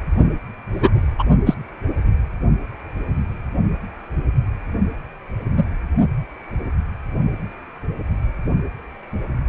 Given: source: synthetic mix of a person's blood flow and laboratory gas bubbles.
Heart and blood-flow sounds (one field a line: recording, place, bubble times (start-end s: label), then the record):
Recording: Doppler ultrasound of blood flow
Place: precordium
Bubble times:
0.72-0.90 s: bubbles
1.19-1.23 s: bubbles
1.46-1.54 s: bubbles
5.57-5.64 s: bubbles
From the record:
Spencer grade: 2 (many but less than half of the cardiac periods contain bubble signals, singularly or in groups)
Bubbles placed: only in the low amplitude regions of the cardiac cycle